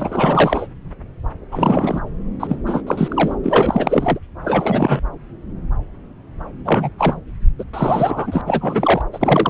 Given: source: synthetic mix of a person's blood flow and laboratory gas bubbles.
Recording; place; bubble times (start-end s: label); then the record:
Doppler ultrasound of blood flow; subclavian vein
0.00-0.67 s: bubbles
1.52-2.00 s: bubbles
2.40-2.57 s: bubbles
2.66-2.82 s: bubbles
2.87-3.35 s: bubbles
3.43-4.18 s: bubbles
4.44-5.00 s: bubbles
6.65-6.92 s: bubbles
6.98-7.21 s: bubbles
7.58-7.64 s: bubbles
7.73-8.41 s: bubbles
8.46-9.02 s: bubbles
9.12-9.50 s: bubbles
From the record:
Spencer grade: 3 (all of the cardiac periods contain showers or single bubble signals, but not dominating or overriding the cardiac motion signals); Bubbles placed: anywhere in the cardiac cycle